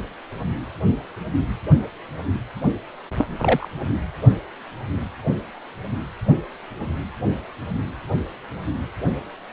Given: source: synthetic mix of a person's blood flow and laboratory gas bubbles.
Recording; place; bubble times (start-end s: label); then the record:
Doppler ultrasound of blood flow; precordium
3.42-3.69 s: bubbles
From the record:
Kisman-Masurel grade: 112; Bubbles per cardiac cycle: 1 to 2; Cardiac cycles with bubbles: 1 to 10%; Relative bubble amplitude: moderate (0.250 to 0.450); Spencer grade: 1 (occasional bubble signal discernible with the cardiac motion signal, with majority of cardiac periods free of bubbles); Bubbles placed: only in the low amplitude regions of the cardiac cycle